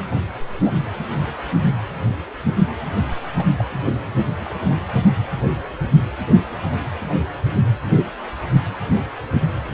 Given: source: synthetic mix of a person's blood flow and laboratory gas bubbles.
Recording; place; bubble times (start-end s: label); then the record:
Doppler ultrasound of blood flow; precordium
0.61-0.73 s: bubbles
3.36-3.45 s: bubbles
3.56-3.65 s: bubbles
4.42-4.50 s: bubbles
From the record:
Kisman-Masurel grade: 121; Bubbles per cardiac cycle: 1 to 2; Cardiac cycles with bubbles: 10 to 50%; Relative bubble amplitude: barely perceptible (0.100 to 0.250); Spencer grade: 2 (many but less than half of the cardiac periods contain bubble signals, singularly or in groups); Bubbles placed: anywhere in the cardiac cycle